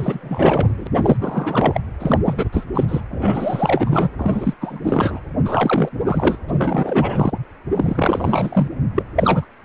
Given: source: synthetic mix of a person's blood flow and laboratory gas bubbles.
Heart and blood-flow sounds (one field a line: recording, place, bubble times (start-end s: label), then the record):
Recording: Doppler ultrasound of blood flow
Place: precordium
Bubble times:
0.00-0.87 s: bubbles
1.02-1.17 s: bubbles
1.20-1.81 s: bubbles
1.99-2.19 s: bubbles
2.25-2.48 s: bubbles
2.52-2.65 s: bubbles
2.74-2.85 s: bubbles
2.88-3.00 s: bubbles
3.10-4.09 s: bubbles
4.18-4.54 s: bubbles
4.61-4.80 s: bubbles
4.84-5.20 s: bubbles
5.45-5.90 s: bubbles
6.05-6.38 s: bubbles
6.48-7.33 s: bubbles
7.74-8.68 s: bubbles
8.95-9.03 s: bubbles
9.15-9.46 s: bubbles
From the record:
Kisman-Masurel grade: 343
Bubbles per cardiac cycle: rolling drumbeat, 9 or more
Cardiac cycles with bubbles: 100%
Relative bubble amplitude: loud (0.450 to 0.775)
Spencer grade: 3 (all of the cardiac periods contain showers or single bubble signals, but not dominating or overriding the cardiac motion signals)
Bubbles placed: anywhere in the cardiac cycle